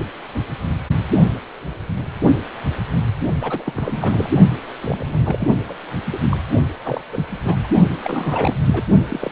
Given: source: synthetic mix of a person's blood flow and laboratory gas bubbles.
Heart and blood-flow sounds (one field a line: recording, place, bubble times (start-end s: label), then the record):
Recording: Doppler ultrasound of blood flow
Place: precordium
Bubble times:
3.21-3.27 s: bubbles
3.40-4.30 s: bubbles
4.80-5.23 s: bubbles
5.25-5.49 s: bubbles
5.67-5.74 s: bubbles
6.06-6.38 s: bubbles
6.84-7.02 s: bubbles
7.12-7.24 s: bubbles
7.39-7.69 s: bubbles
8.03-8.56 s: bubbles
8.65-8.82 s: bubbles
9.08-9.32 s: bubbles
From the record:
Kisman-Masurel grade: 332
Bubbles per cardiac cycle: rolling drumbeat, 9 or more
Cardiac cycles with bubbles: 50 to 99%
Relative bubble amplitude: moderate (0.250 to 0.450)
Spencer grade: 3 (all of the cardiac periods contain showers or single bubble signals, but not dominating or overriding the cardiac motion signals)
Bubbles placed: only in the low amplitude regions of the cardiac cycle